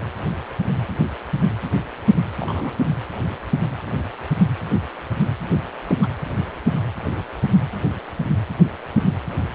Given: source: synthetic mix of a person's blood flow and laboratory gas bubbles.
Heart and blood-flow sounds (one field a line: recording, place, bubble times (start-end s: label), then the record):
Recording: Doppler ultrasound of blood flow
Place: precordium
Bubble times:
2.38-2.71 s: bubbles
5.89-5.96 s: bubbles
6.02-6.08 s: bubbles
From the record:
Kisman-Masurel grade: 122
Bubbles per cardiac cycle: 1 to 2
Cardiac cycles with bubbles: 10 to 50%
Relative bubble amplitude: moderate (0.250 to 0.450)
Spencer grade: 2 (many but less than half of the cardiac periods contain bubble signals, singularly or in groups)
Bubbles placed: anywhere in the cardiac cycle